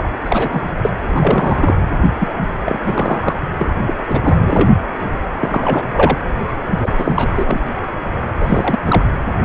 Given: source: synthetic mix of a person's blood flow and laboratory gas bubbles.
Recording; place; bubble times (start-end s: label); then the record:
Doppler ultrasound of blood flow; precordium
0.00-0.07 s: bubbles
0.24-0.61 s: bubbles
0.84-0.90 s: bubbles
1.15-1.79 s: bubbles
2.19-2.33 s: bubbles
2.65-3.40 s: bubbles
3.58-3.67 s: bubbles
3.86-3.94 s: bubbles
4.08-4.19 s: bubbles
4.23-4.69 s: bubbles
5.39-5.84 s: bubbles
5.92-6.17 s: bubbles
6.47-6.52 s: bubbles
6.76-7.28 s: bubbles
7.36-7.65 s: bubbles
8.39-8.79 s: bubbles
8.85-9.03 s: bubbles
From the record:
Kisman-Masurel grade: 333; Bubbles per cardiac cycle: rolling drumbeat, 9 or more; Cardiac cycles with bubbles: 50 to 99%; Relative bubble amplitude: loud (0.450 to 0.775); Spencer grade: 3 (all of the cardiac periods contain showers or single bubble signals, but not dominating or overriding the cardiac motion signals); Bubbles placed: anywhere in the cardiac cycle